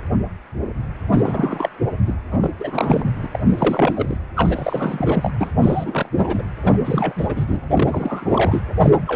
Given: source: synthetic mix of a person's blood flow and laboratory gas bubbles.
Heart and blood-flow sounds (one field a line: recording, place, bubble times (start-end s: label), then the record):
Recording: Doppler ultrasound of blood flow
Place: precordium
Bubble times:
1.13-1.69 s: bubbles
2.06-2.14 s: bubbles
2.31-2.50 s: bubbles
2.59-3.06 s: bubbles
3.23-3.29 s: bubbles
3.31-3.39 s: bubbles
3.46-4.18 s: bubbles
4.36-5.33 s: bubbles
5.41-5.52 s: bubbles
5.58-6.09 s: bubbles
6.12-6.42 s: bubbles
6.62-6.79 s: bubbles
6.84-7.13 s: bubbles
7.17-7.45 s: bubbles
7.47-7.62 s: bubbles
7.70-8.61 s: bubbles
8.82-8.90 s: bubbles
9.07-9.16 s: bubbles
From the record:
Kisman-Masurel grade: 332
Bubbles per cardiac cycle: rolling drumbeat, 9 or more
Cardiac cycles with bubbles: 50 to 99%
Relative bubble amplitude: moderate (0.250 to 0.450)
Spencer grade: 3 (all of the cardiac periods contain showers or single bubble signals, but not dominating or overriding the cardiac motion signals)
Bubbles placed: anywhere in the cardiac cycle